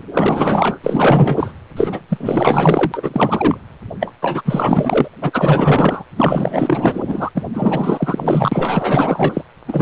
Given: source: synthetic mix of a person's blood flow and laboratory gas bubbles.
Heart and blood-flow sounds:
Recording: Doppler ultrasound of blood flow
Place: precordium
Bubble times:
0.00-0.02 s: bubbles
0.13-0.78 s: bubbles
0.83-1.53 s: bubbles
1.77-2.00 s: bubbles
2.08-3.58 s: bubbles
3.99-4.14 s: bubbles
4.22-4.42 s: bubbles
4.45-5.08 s: bubbles
5.22-6.03 s: bubbles
6.16-7.30 s: bubbles
7.35-7.45 s: bubbles
7.53-9.46 s: bubbles
9.67-9.82 s: bubbles
From the record:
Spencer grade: 4 (maximum detectable bubble signal sounding continuously throughout systole and diastole of every cardiac period, and overriding the amplitude of the normal cardiac signals)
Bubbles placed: anywhere in the cardiac cycle

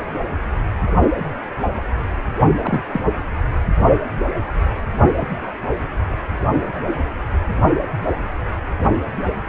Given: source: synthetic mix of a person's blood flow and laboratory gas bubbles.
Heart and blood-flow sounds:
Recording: Doppler ultrasound of blood flow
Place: precordium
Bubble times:
2.62-2.81 s: bubbles
2.92-3.00 s: bubbles
From the record:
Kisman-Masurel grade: 122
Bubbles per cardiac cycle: 1 to 2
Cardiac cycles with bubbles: 10 to 50%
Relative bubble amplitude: moderate (0.250 to 0.450)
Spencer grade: 2 (many but less than half of the cardiac periods contain bubble signals, singularly or in groups)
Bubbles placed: only in the low amplitude regions of the cardiac cycle

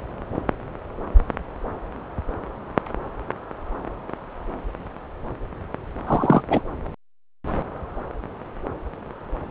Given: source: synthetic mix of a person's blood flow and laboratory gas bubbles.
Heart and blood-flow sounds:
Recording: Doppler ultrasound of blood flow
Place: subclavian vein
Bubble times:
6.07-6.42 s: bubbles
6.50-6.62 s: bubbles
From the record:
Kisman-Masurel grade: 213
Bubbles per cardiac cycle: several, 3 to 8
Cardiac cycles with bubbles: 1 to 10%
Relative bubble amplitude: loud (0.450 to 0.775)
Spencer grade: 1 (occasional bubble signal discernible with the cardiac motion signal, with majority of cardiac periods free of bubbles)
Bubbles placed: anywhere in the cardiac cycle

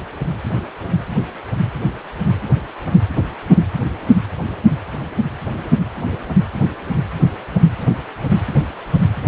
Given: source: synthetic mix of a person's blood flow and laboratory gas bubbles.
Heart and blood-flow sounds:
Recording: Doppler ultrasound of blood flow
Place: precordium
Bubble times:
no bubbles
From the record:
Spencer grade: 0 (complete lack of bubble signals)

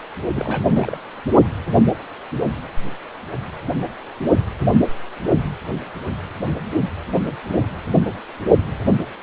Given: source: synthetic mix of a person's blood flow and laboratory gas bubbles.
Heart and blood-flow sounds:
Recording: Doppler ultrasound of blood flow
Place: precordium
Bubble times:
0.33-0.98 s: bubbles
From the record:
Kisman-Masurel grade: 211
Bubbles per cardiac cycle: several, 3 to 8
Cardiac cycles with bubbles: 1 to 10%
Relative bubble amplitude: barely perceptible (0.100 to 0.250)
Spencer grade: 1 (occasional bubble signal discernible with the cardiac motion signal, with majority of cardiac periods free of bubbles)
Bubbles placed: only in the low amplitude regions of the cardiac cycle

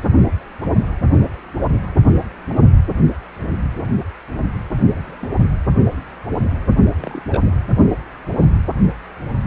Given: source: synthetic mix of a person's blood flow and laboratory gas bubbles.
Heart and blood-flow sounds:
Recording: Doppler ultrasound of blood flow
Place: precordium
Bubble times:
0.17-0.26 s: bubbles
4.83-5.18 s: bubbles
5.21-5.29 s: bubbles
7.02-7.23 s: bubbles
7.29-7.42 s: bubbles
From the record:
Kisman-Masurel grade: 121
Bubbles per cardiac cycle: 1 to 2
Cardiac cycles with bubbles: 10 to 50%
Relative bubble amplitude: barely perceptible (0.100 to 0.250)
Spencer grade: 2 (many but less than half of the cardiac periods contain bubble signals, singularly or in groups)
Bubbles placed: only in the low amplitude regions of the cardiac cycle

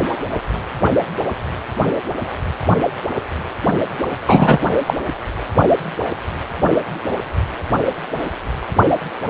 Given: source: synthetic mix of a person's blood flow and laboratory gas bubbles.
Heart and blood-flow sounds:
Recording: Doppler ultrasound of blood flow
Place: precordium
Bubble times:
4.26-4.59 s: bubbles
4.86-4.93 s: bubbles
From the record:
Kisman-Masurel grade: 213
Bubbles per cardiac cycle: several, 3 to 8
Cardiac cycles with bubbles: 1 to 10%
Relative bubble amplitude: loud (0.450 to 0.775)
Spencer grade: 1 (occasional bubble signal discernible with the cardiac motion signal, with majority of cardiac periods free of bubbles)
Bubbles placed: only in the low amplitude regions of the cardiac cycle

